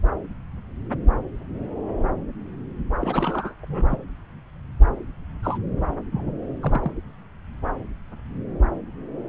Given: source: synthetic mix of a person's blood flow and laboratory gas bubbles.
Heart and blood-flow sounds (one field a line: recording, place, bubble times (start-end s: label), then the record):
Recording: Doppler ultrasound of blood flow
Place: subclavian vein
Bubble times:
3.01-3.54 s: bubbles
3.62-3.65 s: bubbles
3.68-3.99 s: bubbles
5.43-5.58 s: bubbles
6.12-6.33 s: bubbles
6.62-6.91 s: bubbles
From the record:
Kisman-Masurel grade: 221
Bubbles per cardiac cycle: several, 3 to 8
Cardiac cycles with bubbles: 10 to 50%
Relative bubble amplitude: barely perceptible (0.100 to 0.250)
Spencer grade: 2 (many but less than half of the cardiac periods contain bubble signals, singularly or in groups)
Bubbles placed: anywhere in the cardiac cycle